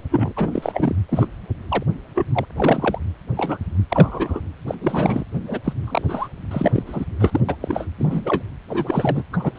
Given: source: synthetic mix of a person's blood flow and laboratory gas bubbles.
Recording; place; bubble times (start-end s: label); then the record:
Doppler ultrasound of blood flow; precordium
0.11-0.33 s: bubbles
0.36-0.95 s: bubbles
1.09-1.27 s: bubbles
1.69-1.83 s: bubbles
2.16-2.26 s: bubbles
2.33-2.46 s: bubbles
2.56-2.98 s: bubbles
3.37-3.58 s: bubbles
3.90-4.40 s: bubbles
4.67-4.75 s: bubbles
4.81-5.24 s: bubbles
5.47-5.59 s: bubbles
5.64-5.73 s: bubbles
5.84-6.28 s: bubbles
6.51-6.83 s: bubbles
6.86-7.05 s: bubbles
7.19-7.40 s: bubbles
7.48-7.55 s: bubbles
7.60-7.87 s: bubbles
7.98-8.42 s: bubbles
8.69-9.23 s: bubbles
9.33-9.51 s: bubbles
9.55-9.59 s: bubbles
From the record:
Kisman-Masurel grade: 242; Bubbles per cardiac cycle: several, 3 to 8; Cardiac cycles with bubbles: 100%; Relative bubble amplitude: moderate (0.250 to 0.450); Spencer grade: 3 (all of the cardiac periods contain showers or single bubble signals, but not dominating or overriding the cardiac motion signals); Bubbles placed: anywhere in the cardiac cycle